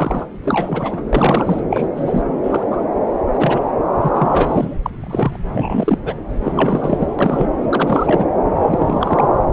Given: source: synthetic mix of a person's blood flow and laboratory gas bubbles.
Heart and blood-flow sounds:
Doppler ultrasound of blood flow; subclavian vein
0.00-0.27 s: bubbles
0.44-1.02 s: bubbles
1.12-1.62 s: bubbles
1.70-1.88 s: bubbles
1.96-2.22 s: bubbles
2.43-2.63 s: bubbles
2.71-2.81 s: bubbles
3.33-3.61 s: bubbles
4.01-4.09 s: bubbles
4.14-4.77 s: bubbles
4.86-4.91 s: bubbles
5.01-5.38 s: bubbles
5.52-5.97 s: bubbles
6.04-6.15 s: bubbles
6.43-7.07 s: bubbles
7.19-7.47 s: bubbles
7.70-8.27 s: bubbles
8.62-9.40 s: bubbles
From the record:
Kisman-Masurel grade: 243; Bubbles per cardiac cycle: several, 3 to 8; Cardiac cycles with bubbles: 100%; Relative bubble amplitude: loud (0.450 to 0.775); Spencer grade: 3 (all of the cardiac periods contain showers or single bubble signals, but not dominating or overriding the cardiac motion signals); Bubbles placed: anywhere in the cardiac cycle

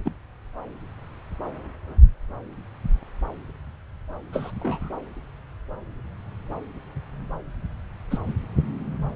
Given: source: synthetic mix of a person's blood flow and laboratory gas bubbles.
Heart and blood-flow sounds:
Doppler ultrasound of blood flow; subclavian vein
0.06-0.13 s: bubbles
4.33-4.51 s: bubbles
4.60-4.89 s: bubbles
8.10-8.18 s: bubbles
8.27-8.33 s: bubbles
From the record:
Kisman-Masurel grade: 121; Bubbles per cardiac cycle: 1 to 2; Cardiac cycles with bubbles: 10 to 50%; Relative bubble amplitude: barely perceptible (0.100 to 0.250); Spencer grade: 2 (many but less than half of the cardiac periods contain bubble signals, singularly or in groups); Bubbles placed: anywhere in the cardiac cycle

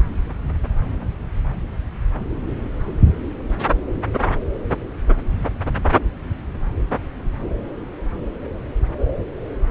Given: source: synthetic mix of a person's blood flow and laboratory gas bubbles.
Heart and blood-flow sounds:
Doppler ultrasound of blood flow; subclavian vein
no bubbles
From the record:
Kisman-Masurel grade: 000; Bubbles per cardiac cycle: 0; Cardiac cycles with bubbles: 0%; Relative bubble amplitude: no bubbles discernible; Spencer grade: 0 (complete lack of bubble signals)

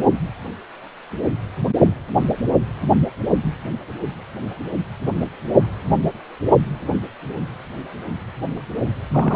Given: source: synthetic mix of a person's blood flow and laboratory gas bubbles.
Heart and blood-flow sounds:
Doppler ultrasound of blood flow; precordium
9.11-9.36 s: bubbles
From the record:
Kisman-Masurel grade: 122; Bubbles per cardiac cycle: 1 to 2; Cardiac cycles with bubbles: 10 to 50%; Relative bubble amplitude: moderate (0.250 to 0.450); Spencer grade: 2 (many but less than half of the cardiac periods contain bubble signals, singularly or in groups); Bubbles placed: only in the low amplitude regions of the cardiac cycle

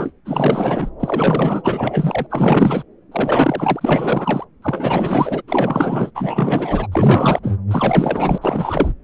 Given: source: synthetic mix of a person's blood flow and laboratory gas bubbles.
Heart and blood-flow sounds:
Doppler ultrasound of blood flow; subclavian vein
0.00-0.12 s: bubbles
0.25-0.90 s: bubbles
1.00-2.27 s: bubbles
2.30-2.83 s: bubbles
3.12-4.45 s: bubbles
4.62-5.42 s: bubbles
5.47-6.11 s: bubbles
6.15-6.87 s: bubbles
6.92-7.40 s: bubbles
7.42-7.54 s: bubbles
7.70-8.38 s: bubbles
8.41-8.91 s: bubbles
From the record:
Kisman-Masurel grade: 444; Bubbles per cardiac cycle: continuous sound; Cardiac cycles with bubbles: 100%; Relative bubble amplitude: maximal (0.775 to 0.999); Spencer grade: 4 (maximum detectable bubble signal sounding continuously throughout systole and diastole of every cardiac period, and overriding the amplitude of the normal cardiac signals); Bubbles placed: anywhere in the cardiac cycle

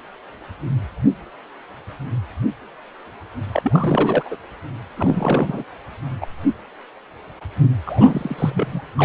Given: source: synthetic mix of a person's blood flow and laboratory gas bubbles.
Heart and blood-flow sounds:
Doppler ultrasound of blood flow; precordium
3.52-4.37 s: bubbles
4.97-5.64 s: bubbles
6.21-6.27 s: bubbles
7.86-8.81 s: bubbles
8.97-9.05 s: bubbles
From the record:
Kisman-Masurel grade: 332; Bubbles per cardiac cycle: rolling drumbeat, 9 or more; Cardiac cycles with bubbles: 50 to 99%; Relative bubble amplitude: moderate (0.250 to 0.450); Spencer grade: 3 (all of the cardiac periods contain showers or single bubble signals, but not dominating or overriding the cardiac motion signals); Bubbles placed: anywhere in the cardiac cycle

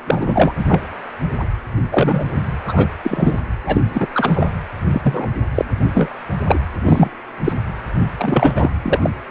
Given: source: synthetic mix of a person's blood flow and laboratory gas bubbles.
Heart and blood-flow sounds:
Doppler ultrasound of blood flow; precordium
0.06-0.52 s: bubbles
0.58-0.65 s: bubbles
0.67-0.80 s: bubbles
1.40-1.47 s: bubbles
1.92-2.24 s: bubbles
2.67-2.88 s: bubbles
3.03-3.41 s: bubbles
3.66-3.81 s: bubbles
3.94-4.06 s: bubbles
4.14-4.48 s: bubbles
4.91-5.27 s: bubbles
5.54-5.65 s: bubbles
5.94-6.09 s: bubbles
6.47-6.59 s: bubbles
6.85-7.09 s: bubbles
7.44-7.52 s: bubbles
8.17-8.70 s: bubbles
8.83-9.10 s: bubbles
From the record:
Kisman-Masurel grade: 243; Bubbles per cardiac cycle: several, 3 to 8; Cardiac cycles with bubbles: 100%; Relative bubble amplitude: loud (0.450 to 0.775); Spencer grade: 3 (all of the cardiac periods contain showers or single bubble signals, but not dominating or overriding the cardiac motion signals); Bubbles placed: anywhere in the cardiac cycle

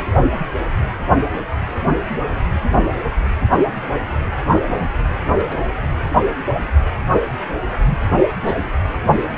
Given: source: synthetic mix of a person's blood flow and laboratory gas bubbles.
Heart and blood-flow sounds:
Doppler ultrasound of blood flow; precordium
4.51-4.90 s: bubbles
5.35-5.69 s: bubbles
8.20-8.27 s: bubbles
8.43-8.71 s: bubbles
From the record:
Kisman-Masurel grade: 121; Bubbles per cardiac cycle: 1 to 2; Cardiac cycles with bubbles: 10 to 50%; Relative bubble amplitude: barely perceptible (0.100 to 0.250); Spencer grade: 2 (many but less than half of the cardiac periods contain bubble signals, singularly or in groups); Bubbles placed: anywhere in the cardiac cycle

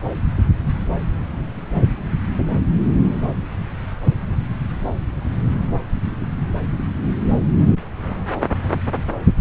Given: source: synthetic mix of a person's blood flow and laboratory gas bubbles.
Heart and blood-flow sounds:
Doppler ultrasound of blood flow; subclavian vein
no bubbles
From the record:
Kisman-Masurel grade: 000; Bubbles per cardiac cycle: 0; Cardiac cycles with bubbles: 0%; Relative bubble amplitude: no bubbles discernible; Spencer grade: 0 (complete lack of bubble signals)

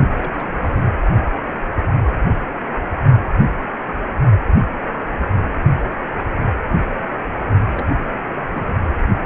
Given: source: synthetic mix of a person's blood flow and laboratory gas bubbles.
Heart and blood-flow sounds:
Doppler ultrasound of blood flow; precordium
0.00-0.08 s: bubbles
0.17-0.48 s: bubbles
0.52-0.84 s: bubbles
7.72-7.90 s: bubbles
7.99-8.04 s: bubbles
8.51-8.73 s: bubbles
From the record:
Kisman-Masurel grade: 221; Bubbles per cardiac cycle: several, 3 to 8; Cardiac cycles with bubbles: 10 to 50%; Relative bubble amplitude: barely perceptible (0.100 to 0.250); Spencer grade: 2 (many but less than half of the cardiac periods contain bubble signals, singularly or in groups); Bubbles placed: only in the low amplitude regions of the cardiac cycle

